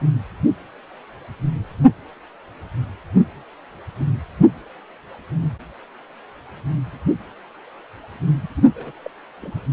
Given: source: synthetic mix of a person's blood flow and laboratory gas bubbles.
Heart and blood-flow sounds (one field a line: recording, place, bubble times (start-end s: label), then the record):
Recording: Doppler ultrasound of blood flow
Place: precordium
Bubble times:
8.42-8.48 s: bubbles
8.56-8.69 s: bubbles
8.76-8.92 s: bubbles
9.05-9.11 s: bubbles
9.42-9.62 s: bubbles
From the record:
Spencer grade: 1 (occasional bubble signal discernible with the cardiac motion signal, with majority of cardiac periods free of bubbles)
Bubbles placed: anywhere in the cardiac cycle